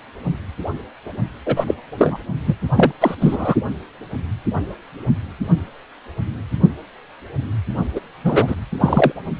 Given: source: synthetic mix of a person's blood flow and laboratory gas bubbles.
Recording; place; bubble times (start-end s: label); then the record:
Doppler ultrasound of blood flow; precordium
1.46-1.75 s: bubbles
1.97-2.18 s: bubbles
2.46-2.55 s: bubbles
2.76-2.92 s: bubbles
3.00-3.15 s: bubbles
3.20-3.55 s: bubbles
7.95-8.00 s: bubbles
8.24-8.56 s: bubbles
8.80-9.12 s: bubbles
From the record:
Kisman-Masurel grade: 223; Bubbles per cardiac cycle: several, 3 to 8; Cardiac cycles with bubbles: 10 to 50%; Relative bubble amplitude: loud (0.450 to 0.775); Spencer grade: 2 (many but less than half of the cardiac periods contain bubble signals, singularly or in groups); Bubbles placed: only in the low amplitude regions of the cardiac cycle